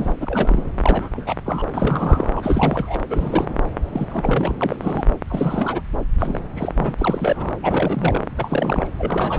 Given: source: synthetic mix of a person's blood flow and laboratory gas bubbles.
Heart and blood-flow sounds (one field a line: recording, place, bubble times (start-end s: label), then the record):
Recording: Doppler ultrasound of blood flow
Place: subclavian vein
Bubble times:
0.00-0.13 s: bubbles
0.16-0.61 s: bubbles
0.82-1.08 s: bubbles
1.12-1.35 s: bubbles
1.45-1.64 s: bubbles
1.73-2.96 s: bubbles
3.09-3.54 s: bubbles
3.85-4.54 s: bubbles
4.61-4.76 s: bubbles
4.81-5.05 s: bubbles
5.30-5.82 s: bubbles
6.19-6.39 s: bubbles
6.56-6.95 s: bubbles
6.98-7.53 s: bubbles
7.62-8.21 s: bubbles
8.36-8.88 s: bubbles
8.98-9.39 s: bubbles
From the record:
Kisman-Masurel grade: 342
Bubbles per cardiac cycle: rolling drumbeat, 9 or more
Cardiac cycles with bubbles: 100%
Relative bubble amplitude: moderate (0.250 to 0.450)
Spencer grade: 3 (all of the cardiac periods contain showers or single bubble signals, but not dominating or overriding the cardiac motion signals)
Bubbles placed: anywhere in the cardiac cycle